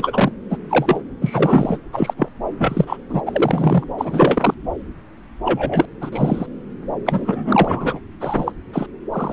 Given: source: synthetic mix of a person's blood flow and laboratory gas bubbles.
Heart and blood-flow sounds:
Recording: Doppler ultrasound of blood flow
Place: subclavian vein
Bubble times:
0.00-0.32 s: bubbles
0.49-0.57 s: bubbles
0.69-1.02 s: bubbles
1.21-1.78 s: bubbles
1.93-2.13 s: bubbles
2.17-2.28 s: bubbles
2.58-2.97 s: bubbles
3.09-3.22 s: bubbles
3.26-3.84 s: bubbles
3.98-4.54 s: bubbles
5.45-5.86 s: bubbles
6.00-6.47 s: bubbles
7.06-7.99 s: bubbles
8.21-8.52 s: bubbles
8.72-8.87 s: bubbles
9.12-9.33 s: bubbles
From the record:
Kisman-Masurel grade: 233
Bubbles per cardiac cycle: several, 3 to 8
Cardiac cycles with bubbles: 50 to 99%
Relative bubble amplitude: loud (0.450 to 0.775)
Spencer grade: 3 (all of the cardiac periods contain showers or single bubble signals, but not dominating or overriding the cardiac motion signals)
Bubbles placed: anywhere in the cardiac cycle

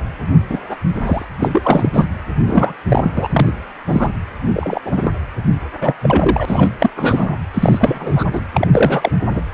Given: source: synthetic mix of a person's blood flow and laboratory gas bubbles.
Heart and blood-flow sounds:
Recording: Doppler ultrasound of blood flow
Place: precordium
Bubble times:
0.49-0.58 s: bubbles
0.70-0.77 s: bubbles
1.06-1.25 s: bubbles
1.39-1.50 s: bubbles
1.52-1.90 s: bubbles
1.93-2.07 s: bubbles
2.46-2.75 s: bubbles
2.89-3.12 s: bubbles
3.15-3.28 s: bubbles
3.31-3.51 s: bubbles
3.86-4.12 s: bubbles
4.54-4.80 s: bubbles
4.85-5.11 s: bubbles
5.81-5.93 s: bubbles
6.01-6.69 s: bubbles
6.79-6.91 s: bubbles
6.96-7.38 s: bubbles
7.54-8.24 s: bubbles
8.33-8.41 s: bubbles
8.54-8.68 s: bubbles
8.73-9.11 s: bubbles
9.31-9.41 s: bubbles
From the record:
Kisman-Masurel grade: 243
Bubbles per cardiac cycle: several, 3 to 8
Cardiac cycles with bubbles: 100%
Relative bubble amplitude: loud (0.450 to 0.775)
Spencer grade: 3 (all of the cardiac periods contain showers or single bubble signals, but not dominating or overriding the cardiac motion signals)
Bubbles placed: anywhere in the cardiac cycle

